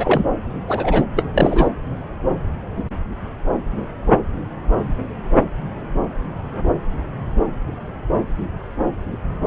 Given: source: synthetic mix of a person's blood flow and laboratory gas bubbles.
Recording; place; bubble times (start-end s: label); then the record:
Doppler ultrasound of blood flow; subclavian vein
0.00-0.24 s: bubbles
0.68-1.04 s: bubbles
1.16-1.24 s: bubbles
1.33-1.70 s: bubbles
From the record:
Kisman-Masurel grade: 223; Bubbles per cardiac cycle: several, 3 to 8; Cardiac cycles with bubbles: 10 to 50%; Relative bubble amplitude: loud (0.450 to 0.775); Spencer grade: 2 (many but less than half of the cardiac periods contain bubble signals, singularly or in groups); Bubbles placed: anywhere in the cardiac cycle